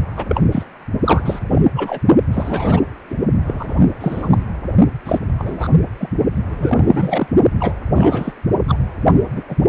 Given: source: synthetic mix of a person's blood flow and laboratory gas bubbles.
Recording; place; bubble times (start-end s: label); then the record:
Doppler ultrasound of blood flow; precordium
0.17-0.25 s: bubbles
0.28-0.41 s: bubbles
0.52-0.64 s: bubbles
1.04-1.40 s: bubbles
1.51-1.62 s: bubbles
1.76-1.99 s: bubbles
2.31-2.81 s: bubbles
3.10-3.16 s: bubbles
3.45-3.83 s: bubbles
4.00-4.43 s: bubbles
5.05-5.18 s: bubbles
5.38-5.68 s: bubbles
6.00-6.09 s: bubbles
6.48-7.27 s: bubbles
7.59-7.73 s: bubbles
7.94-8.34 s: bubbles
8.68-8.78 s: bubbles
9.36-9.43 s: bubbles
9.49-9.55 s: bubbles
From the record:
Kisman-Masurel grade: 243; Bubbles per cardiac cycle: several, 3 to 8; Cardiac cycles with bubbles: 100%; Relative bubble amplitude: loud (0.450 to 0.775); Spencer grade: 3 (all of the cardiac periods contain showers or single bubble signals, but not dominating or overriding the cardiac motion signals); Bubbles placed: only in the low amplitude regions of the cardiac cycle